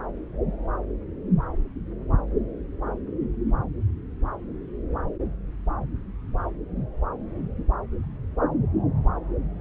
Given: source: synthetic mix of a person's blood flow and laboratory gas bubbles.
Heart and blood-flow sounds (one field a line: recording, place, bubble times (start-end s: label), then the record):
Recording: Doppler ultrasound of blood flow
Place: subclavian vein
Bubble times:
no bubbles
From the record:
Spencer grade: 0 (complete lack of bubble signals)